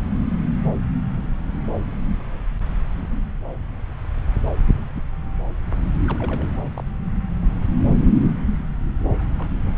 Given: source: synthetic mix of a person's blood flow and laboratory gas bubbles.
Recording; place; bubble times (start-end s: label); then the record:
Doppler ultrasound of blood flow; subclavian vein
4.95-5.03 s: bubbles
6.07-6.51 s: bubbles
6.77-6.82 s: bubbles
9.38-9.47 s: bubbles
From the record:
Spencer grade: 2 (many but less than half of the cardiac periods contain bubble signals, singularly or in groups); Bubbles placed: anywhere in the cardiac cycle